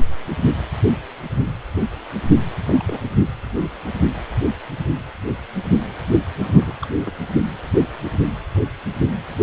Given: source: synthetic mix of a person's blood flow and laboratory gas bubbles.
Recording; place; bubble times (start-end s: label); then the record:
Doppler ultrasound of blood flow; precordium
2.68-2.83 s: bubbles
2.88-3.00 s: bubbles
6.39-6.74 s: bubbles
6.81-6.88 s: bubbles
7.05-7.12 s: bubbles
From the record:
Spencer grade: 2 (many but less than half of the cardiac periods contain bubble signals, singularly or in groups); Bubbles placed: anywhere in the cardiac cycle